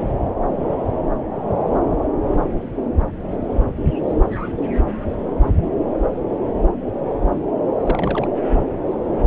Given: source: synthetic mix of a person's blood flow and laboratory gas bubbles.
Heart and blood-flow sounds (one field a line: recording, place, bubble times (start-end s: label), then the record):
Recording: Doppler ultrasound of blood flow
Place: subclavian vein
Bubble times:
7.83-8.28 s: bubbles
From the record:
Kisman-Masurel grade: 211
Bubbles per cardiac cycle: several, 3 to 8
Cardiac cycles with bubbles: 1 to 10%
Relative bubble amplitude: barely perceptible (0.100 to 0.250)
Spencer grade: 1 (occasional bubble signal discernible with the cardiac motion signal, with majority of cardiac periods free of bubbles)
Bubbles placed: anywhere in the cardiac cycle